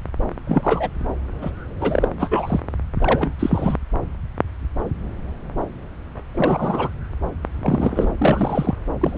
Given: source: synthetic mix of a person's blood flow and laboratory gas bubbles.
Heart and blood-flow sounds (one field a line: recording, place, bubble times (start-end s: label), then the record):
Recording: Doppler ultrasound of blood flow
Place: subclavian vein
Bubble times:
0.47-0.89 s: bubbles
1.42-1.51 s: bubbles
1.81-2.08 s: bubbles
2.19-2.60 s: bubbles
3.00-3.34 s: bubbles
3.39-3.77 s: bubbles
6.34-6.90 s: bubbles
7.61-8.11 s: bubbles
8.18-8.75 s: bubbles
9.01-9.18 s: bubbles
From the record:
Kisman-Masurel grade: 232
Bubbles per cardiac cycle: several, 3 to 8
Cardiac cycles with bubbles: 50 to 99%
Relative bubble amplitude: moderate (0.250 to 0.450)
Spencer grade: 3 (all of the cardiac periods contain showers or single bubble signals, but not dominating or overriding the cardiac motion signals)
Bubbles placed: anywhere in the cardiac cycle